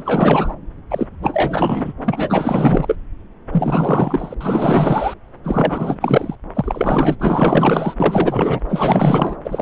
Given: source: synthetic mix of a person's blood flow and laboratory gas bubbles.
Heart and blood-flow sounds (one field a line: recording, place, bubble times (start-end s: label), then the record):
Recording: Doppler ultrasound of blood flow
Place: subclavian vein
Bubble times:
0.00-0.55 s: bubbles
0.90-1.07 s: bubbles
1.21-1.93 s: bubbles
2.04-2.96 s: bubbles
3.52-4.34 s: bubbles
4.41-5.14 s: bubbles
5.43-5.98 s: bubbles
6.00-6.35 s: bubbles
6.54-7.16 s: bubbles
7.20-7.94 s: bubbles
8.00-8.61 s: bubbles
8.69-9.37 s: bubbles
9.45-9.62 s: bubbles
From the record:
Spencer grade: 4 (maximum detectable bubble signal sounding continuously throughout systole and diastole of every cardiac period, and overriding the amplitude of the normal cardiac signals)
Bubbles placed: anywhere in the cardiac cycle